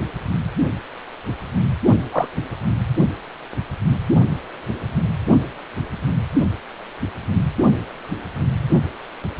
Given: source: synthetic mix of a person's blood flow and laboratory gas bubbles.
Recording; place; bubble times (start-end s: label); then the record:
Doppler ultrasound of blood flow; precordium
2.11-2.28 s: bubbles
From the record:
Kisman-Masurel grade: 123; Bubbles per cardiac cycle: 1 to 2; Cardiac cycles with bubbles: 10 to 50%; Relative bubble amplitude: loud (0.450 to 0.775); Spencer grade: 2 (many but less than half of the cardiac periods contain bubble signals, singularly or in groups); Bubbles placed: only in the low amplitude regions of the cardiac cycle